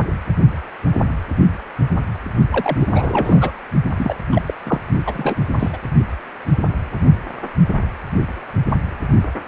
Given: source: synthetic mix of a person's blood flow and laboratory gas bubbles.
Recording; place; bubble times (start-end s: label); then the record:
Doppler ultrasound of blood flow; precordium
2.50-3.51 s: bubbles
3.97-4.18 s: bubbles
4.32-4.42 s: bubbles
4.47-4.54 s: bubbles
4.65-4.81 s: bubbles
5.06-5.36 s: bubbles
5.58-5.71 s: bubbles
5.73-5.77 s: bubbles
From the record:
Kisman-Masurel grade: 332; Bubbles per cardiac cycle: rolling drumbeat, 9 or more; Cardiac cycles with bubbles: 50 to 99%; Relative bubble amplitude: moderate (0.250 to 0.450); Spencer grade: 3 (all of the cardiac periods contain showers or single bubble signals, but not dominating or overriding the cardiac motion signals); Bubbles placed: only in the low amplitude regions of the cardiac cycle